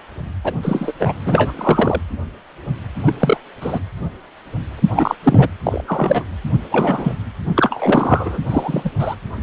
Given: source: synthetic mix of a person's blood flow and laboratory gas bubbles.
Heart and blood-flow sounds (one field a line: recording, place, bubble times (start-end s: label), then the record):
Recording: Doppler ultrasound of blood flow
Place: precordium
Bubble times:
0.44-0.52 s: bubbles
0.62-0.92 s: bubbles
0.99-1.13 s: bubbles
1.25-1.53 s: bubbles
1.55-2.02 s: bubbles
3.06-3.14 s: bubbles
3.20-3.38 s: bubbles
3.61-3.80 s: bubbles
4.77-5.15 s: bubbles
5.23-5.48 s: bubbles
5.64-5.83 s: bubbles
5.87-6.25 s: bubbles
6.71-7.15 s: bubbles
7.55-8.38 s: bubbles
8.49-8.90 s: bubbles
8.98-9.15 s: bubbles
From the record:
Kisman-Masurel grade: 233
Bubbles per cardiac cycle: several, 3 to 8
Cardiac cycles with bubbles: 50 to 99%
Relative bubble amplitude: loud (0.450 to 0.775)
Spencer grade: 3 (all of the cardiac periods contain showers or single bubble signals, but not dominating or overriding the cardiac motion signals)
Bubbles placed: anywhere in the cardiac cycle